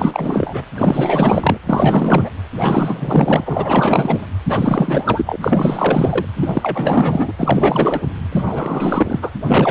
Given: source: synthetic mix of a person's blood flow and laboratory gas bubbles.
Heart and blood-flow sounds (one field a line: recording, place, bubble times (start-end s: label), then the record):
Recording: Doppler ultrasound of blood flow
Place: precordium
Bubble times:
0.00-0.63 s: bubbles
0.75-1.57 s: bubbles
1.66-2.29 s: bubbles
2.57-4.26 s: bubbles
4.48-5.36 s: bubbles
5.40-6.25 s: bubbles
6.36-7.31 s: bubbles
7.38-8.01 s: bubbles
8.32-9.30 s: bubbles
9.46-9.71 s: bubbles
From the record:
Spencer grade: 4 (maximum detectable bubble signal sounding continuously throughout systole and diastole of every cardiac period, and overriding the amplitude of the normal cardiac signals)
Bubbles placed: anywhere in the cardiac cycle